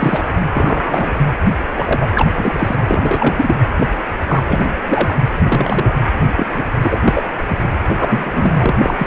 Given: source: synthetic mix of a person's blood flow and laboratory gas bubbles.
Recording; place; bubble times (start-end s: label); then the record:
Doppler ultrasound of blood flow; precordium
0.00-0.28 s: bubbles
0.53-1.14 s: bubbles
1.76-2.07 s: bubbles
2.15-2.32 s: bubbles
2.37-2.76 s: bubbles
2.87-3.55 s: bubbles
3.79-3.88 s: bubbles
4.27-4.81 s: bubbles
4.87-5.14 s: bubbles
5.43-5.93 s: bubbles
6.36-6.46 s: bubbles
6.54-6.63 s: bubbles
6.81-6.98 s: bubbles
7.04-7.23 s: bubbles
7.48-7.58 s: bubbles
7.88-8.75 s: bubbles
8.79-9.07 s: bubbles
From the record:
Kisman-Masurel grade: 243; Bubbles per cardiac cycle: several, 3 to 8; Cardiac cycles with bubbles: 100%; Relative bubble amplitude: loud (0.450 to 0.775); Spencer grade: 3 (all of the cardiac periods contain showers or single bubble signals, but not dominating or overriding the cardiac motion signals); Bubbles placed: anywhere in the cardiac cycle